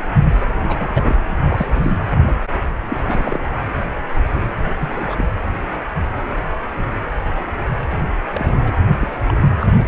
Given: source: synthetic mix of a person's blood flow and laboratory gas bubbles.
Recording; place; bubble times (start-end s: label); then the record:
Doppler ultrasound of blood flow; precordium
0.67-1.16 s: bubbles
1.28-1.38 s: bubbles
1.45-1.92 s: bubbles
2.27-2.36 s: bubbles
2.88-2.96 s: bubbles
3.06-3.45 s: bubbles
4.80-5.26 s: bubbles
8.33-8.80 s: bubbles
9.03-9.17 s: bubbles
9.27-9.45 s: bubbles
9.59-9.67 s: bubbles
9.86-9.88 s: bubbles
From the record:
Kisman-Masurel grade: 232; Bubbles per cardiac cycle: several, 3 to 8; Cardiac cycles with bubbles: 50 to 99%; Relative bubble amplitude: moderate (0.250 to 0.450); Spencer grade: 3 (all of the cardiac periods contain showers or single bubble signals, but not dominating or overriding the cardiac motion signals); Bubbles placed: anywhere in the cardiac cycle